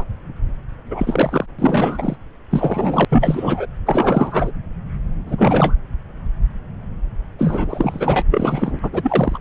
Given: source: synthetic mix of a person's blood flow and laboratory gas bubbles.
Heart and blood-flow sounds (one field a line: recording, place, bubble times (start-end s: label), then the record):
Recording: Doppler ultrasound of blood flow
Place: subclavian vein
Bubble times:
0.00-0.04 s: bubbles
0.90-1.46 s: bubbles
1.58-2.17 s: bubbles
2.50-3.05 s: bubbles
3.10-3.66 s: bubbles
3.86-4.51 s: bubbles
5.26-5.75 s: bubbles
7.38-8.23 s: bubbles
8.28-8.79 s: bubbles
8.82-9.38 s: bubbles
From the record:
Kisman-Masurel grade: 333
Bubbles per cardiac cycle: rolling drumbeat, 9 or more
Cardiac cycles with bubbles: 50 to 99%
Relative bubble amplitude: loud (0.450 to 0.775)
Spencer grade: 3 (all of the cardiac periods contain showers or single bubble signals, but not dominating or overriding the cardiac motion signals)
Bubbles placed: anywhere in the cardiac cycle